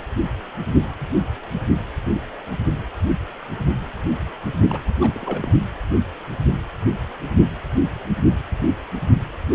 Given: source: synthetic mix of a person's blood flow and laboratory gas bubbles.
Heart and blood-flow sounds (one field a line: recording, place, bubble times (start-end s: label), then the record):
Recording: Doppler ultrasound of blood flow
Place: precordium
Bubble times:
4.69-4.78 s: bubbles
5.00-5.49 s: bubbles
From the record:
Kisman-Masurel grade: 211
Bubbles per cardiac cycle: several, 3 to 8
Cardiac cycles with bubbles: 1 to 10%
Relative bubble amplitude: barely perceptible (0.100 to 0.250)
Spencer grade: 1 (occasional bubble signal discernible with the cardiac motion signal, with majority of cardiac periods free of bubbles)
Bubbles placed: only in the low amplitude regions of the cardiac cycle